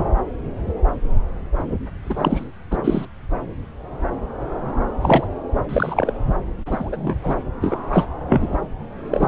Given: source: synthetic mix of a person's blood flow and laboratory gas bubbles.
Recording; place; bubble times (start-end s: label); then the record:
Doppler ultrasound of blood flow; subclavian vein
2.03-2.47 s: bubbles
2.71-2.78 s: bubbles
2.84-3.05 s: bubbles
5.01-5.26 s: bubbles
5.69-6.13 s: bubbles
6.66-7.16 s: bubbles
7.23-7.36 s: bubbles
7.62-7.78 s: bubbles
7.92-8.05 s: bubbles
8.28-8.48 s: bubbles
9.11-9.28 s: bubbles
From the record:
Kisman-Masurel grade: 233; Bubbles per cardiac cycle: several, 3 to 8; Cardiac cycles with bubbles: 50 to 99%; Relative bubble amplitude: loud (0.450 to 0.775); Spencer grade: 3 (all of the cardiac periods contain showers or single bubble signals, but not dominating or overriding the cardiac motion signals); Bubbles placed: anywhere in the cardiac cycle